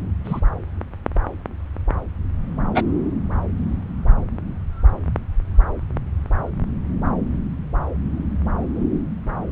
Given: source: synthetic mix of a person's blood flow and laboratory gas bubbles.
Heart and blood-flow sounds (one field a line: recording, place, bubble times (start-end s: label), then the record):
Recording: Doppler ultrasound of blood flow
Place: subclavian vein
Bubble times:
0.24-0.40 s: bubbles
2.74-2.83 s: bubbles
From the record:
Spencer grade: 2 (many but less than half of the cardiac periods contain bubble signals, singularly or in groups)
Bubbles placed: anywhere in the cardiac cycle